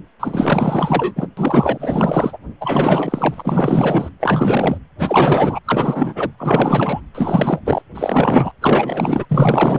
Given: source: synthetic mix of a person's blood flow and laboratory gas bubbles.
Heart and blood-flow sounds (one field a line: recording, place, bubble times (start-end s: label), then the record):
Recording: Doppler ultrasound of blood flow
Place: precordium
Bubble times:
0.20-1.28 s: bubbles
1.37-2.38 s: bubbles
2.60-4.09 s: bubbles
4.20-4.78 s: bubbles
4.98-5.59 s: bubbles
5.65-6.30 s: bubbles
6.38-7.01 s: bubbles
7.14-7.62 s: bubbles
7.64-7.82 s: bubbles
7.94-8.52 s: bubbles
8.62-9.26 s: bubbles
9.29-9.78 s: bubbles
From the record:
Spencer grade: 4 (maximum detectable bubble signal sounding continuously throughout systole and diastole of every cardiac period, and overriding the amplitude of the normal cardiac signals)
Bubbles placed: anywhere in the cardiac cycle